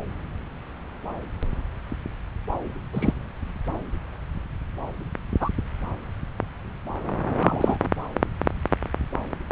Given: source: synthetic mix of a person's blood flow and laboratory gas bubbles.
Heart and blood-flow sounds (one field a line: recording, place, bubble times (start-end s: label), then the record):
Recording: Doppler ultrasound of blood flow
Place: subclavian vein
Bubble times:
2.93-3.13 s: bubbles
5.40-5.48 s: bubbles
7.40-7.78 s: bubbles
From the record:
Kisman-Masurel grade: 122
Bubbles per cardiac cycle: 1 to 2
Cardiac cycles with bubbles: 10 to 50%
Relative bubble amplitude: moderate (0.250 to 0.450)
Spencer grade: 2 (many but less than half of the cardiac periods contain bubble signals, singularly or in groups)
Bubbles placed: anywhere in the cardiac cycle